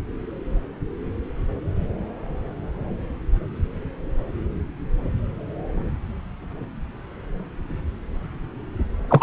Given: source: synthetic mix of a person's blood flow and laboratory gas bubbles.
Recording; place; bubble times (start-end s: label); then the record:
Doppler ultrasound of blood flow; subclavian vein
9.08-9.23 s: bubbles
From the record:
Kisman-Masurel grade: 213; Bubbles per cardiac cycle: several, 3 to 8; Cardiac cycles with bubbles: 1 to 10%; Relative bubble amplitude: loud (0.450 to 0.775); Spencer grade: 1 (occasional bubble signal discernible with the cardiac motion signal, with majority of cardiac periods free of bubbles); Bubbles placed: anywhere in the cardiac cycle